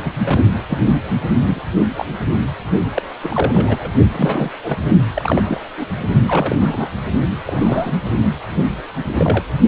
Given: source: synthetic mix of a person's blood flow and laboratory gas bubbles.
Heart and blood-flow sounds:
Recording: Doppler ultrasound of blood flow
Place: precordium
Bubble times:
0.04-0.11 s: bubbles
0.25-0.40 s: bubbles
0.68-0.78 s: bubbles
1.46-1.60 s: bubbles
1.97-2.05 s: bubbles
2.94-3.02 s: bubbles
3.22-3.90 s: bubbles
4.11-4.51 s: bubbles
4.63-4.77 s: bubbles
5.15-5.60 s: bubbles
5.77-5.86 s: bubbles
6.28-6.55 s: bubbles
6.60-6.88 s: bubbles
7.46-7.91 s: bubbles
9.04-9.44 s: bubbles
From the record:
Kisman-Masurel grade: 242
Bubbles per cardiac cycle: several, 3 to 8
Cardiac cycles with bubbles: 100%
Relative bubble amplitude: moderate (0.250 to 0.450)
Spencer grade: 3 (all of the cardiac periods contain showers or single bubble signals, but not dominating or overriding the cardiac motion signals)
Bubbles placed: only in the low amplitude regions of the cardiac cycle

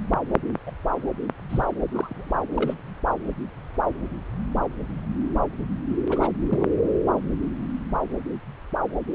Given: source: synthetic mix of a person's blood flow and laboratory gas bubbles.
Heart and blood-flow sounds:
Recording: Doppler ultrasound of blood flow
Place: subclavian vein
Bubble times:
0.67-0.71 s: bubbles
1.49-1.65 s: bubbles
1.93-2.41 s: bubbles
2.54-2.74 s: bubbles
6.09-6.29 s: bubbles
6.50-6.65 s: bubbles
From the record:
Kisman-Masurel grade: 121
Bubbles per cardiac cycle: 1 to 2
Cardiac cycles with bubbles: 10 to 50%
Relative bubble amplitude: barely perceptible (0.100 to 0.250)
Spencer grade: 2 (many but less than half of the cardiac periods contain bubble signals, singularly or in groups)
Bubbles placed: anywhere in the cardiac cycle

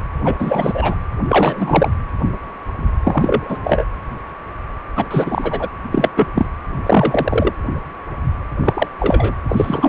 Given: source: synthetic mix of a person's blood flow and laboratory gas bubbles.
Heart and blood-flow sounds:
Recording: Doppler ultrasound of blood flow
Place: precordium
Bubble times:
0.24-0.35 s: bubbles
0.38-0.95 s: bubbles
1.28-1.91 s: bubbles
3.03-3.58 s: bubbles
3.64-3.85 s: bubbles
4.96-5.07 s: bubbles
5.10-5.67 s: bubbles
5.92-6.10 s: bubbles
6.17-6.27 s: bubbles
6.34-6.46 s: bubbles
6.86-7.52 s: bubbles
8.60-8.88 s: bubbles
8.99-9.33 s: bubbles
9.48-9.89 s: bubbles
From the record:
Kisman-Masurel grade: 233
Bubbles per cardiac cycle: several, 3 to 8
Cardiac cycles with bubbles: 50 to 99%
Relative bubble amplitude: loud (0.450 to 0.775)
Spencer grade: 3 (all of the cardiac periods contain showers or single bubble signals, but not dominating or overriding the cardiac motion signals)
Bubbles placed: anywhere in the cardiac cycle

